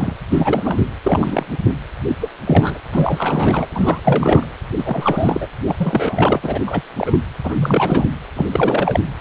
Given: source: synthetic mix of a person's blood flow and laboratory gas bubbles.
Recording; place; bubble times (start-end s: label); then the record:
Doppler ultrasound of blood flow; precordium
0.00-0.13 s: bubbles
0.30-0.85 s: bubbles
1.04-1.46 s: bubbles
1.49-1.58 s: bubbles
1.68-1.74 s: bubbles
2.08-2.16 s: bubbles
2.21-2.29 s: bubbles
2.46-2.78 s: bubbles
2.92-3.67 s: bubbles
3.70-4.47 s: bubbles
4.77-5.48 s: bubbles
5.65-5.76 s: bubbles
5.79-6.40 s: bubbles
6.42-6.61 s: bubbles
6.67-6.83 s: bubbles
6.97-7.23 s: bubbles
7.43-8.06 s: bubbles
8.34-8.99 s: bubbles
From the record:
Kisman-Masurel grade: 342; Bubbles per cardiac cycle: rolling drumbeat, 9 or more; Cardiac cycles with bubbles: 100%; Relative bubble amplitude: moderate (0.250 to 0.450); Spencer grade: 3 (all of the cardiac periods contain showers or single bubble signals, but not dominating or overriding the cardiac motion signals); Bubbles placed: anywhere in the cardiac cycle